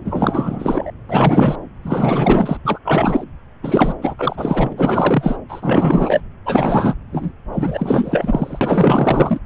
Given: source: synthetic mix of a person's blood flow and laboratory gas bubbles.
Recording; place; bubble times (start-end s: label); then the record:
Doppler ultrasound of blood flow; subclavian vein
0.05-0.92 s: bubbles
1.09-1.56 s: bubbles
1.82-2.57 s: bubbles
2.65-2.79 s: bubbles
2.85-3.24 s: bubbles
3.63-3.95 s: bubbles
4.01-4.73 s: bubbles
4.77-5.40 s: bubbles
5.49-6.21 s: bubbles
6.45-6.95 s: bubbles
7.12-7.32 s: bubbles
7.53-9.39 s: bubbles
From the record:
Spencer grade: 4 (maximum detectable bubble signal sounding continuously throughout systole and diastole of every cardiac period, and overriding the amplitude of the normal cardiac signals); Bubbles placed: anywhere in the cardiac cycle